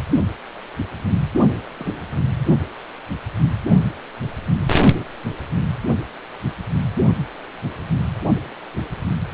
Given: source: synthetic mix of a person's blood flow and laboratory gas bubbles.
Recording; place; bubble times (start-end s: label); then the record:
Doppler ultrasound of blood flow; precordium
1.77-2.14 s: bubbles
From the record:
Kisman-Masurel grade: 121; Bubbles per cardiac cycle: 1 to 2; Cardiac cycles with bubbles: 10 to 50%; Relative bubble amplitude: barely perceptible (0.100 to 0.250); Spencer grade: 2 (many but less than half of the cardiac periods contain bubble signals, singularly or in groups); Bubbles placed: only in the low amplitude regions of the cardiac cycle